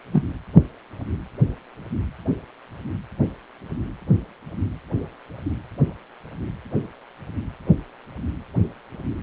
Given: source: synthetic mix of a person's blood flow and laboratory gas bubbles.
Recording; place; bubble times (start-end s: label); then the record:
Doppler ultrasound of blood flow; precordium
0.12-0.23 s: bubbles
From the record:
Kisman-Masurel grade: 113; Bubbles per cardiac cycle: 1 to 2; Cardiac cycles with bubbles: 1 to 10%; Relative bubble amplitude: loud (0.450 to 0.775); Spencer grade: 1 (occasional bubble signal discernible with the cardiac motion signal, with majority of cardiac periods free of bubbles); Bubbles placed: anywhere in the cardiac cycle